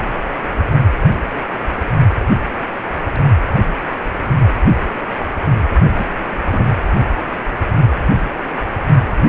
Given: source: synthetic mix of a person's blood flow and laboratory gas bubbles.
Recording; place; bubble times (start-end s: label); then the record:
Doppler ultrasound of blood flow; precordium
5.96-6.06 s: bubbles
6.53-6.64 s: bubbles
From the record:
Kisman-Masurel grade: 113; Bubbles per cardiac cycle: 1 to 2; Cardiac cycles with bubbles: 1 to 10%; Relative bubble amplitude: loud (0.450 to 0.775); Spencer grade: 1 (occasional bubble signal discernible with the cardiac motion signal, with majority of cardiac periods free of bubbles); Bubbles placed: only in the low amplitude regions of the cardiac cycle